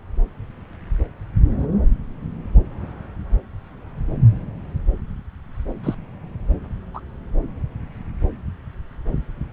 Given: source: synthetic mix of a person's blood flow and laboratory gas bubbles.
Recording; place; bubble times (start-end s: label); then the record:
Doppler ultrasound of blood flow; subclavian vein
1.58-1.67 s: bubbles
5.83-5.94 s: bubbles
6.93-7.00 s: bubbles
From the record:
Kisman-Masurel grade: 122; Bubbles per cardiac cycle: 1 to 2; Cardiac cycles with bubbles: 10 to 50%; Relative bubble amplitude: moderate (0.250 to 0.450); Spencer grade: 2 (many but less than half of the cardiac periods contain bubble signals, singularly or in groups); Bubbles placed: anywhere in the cardiac cycle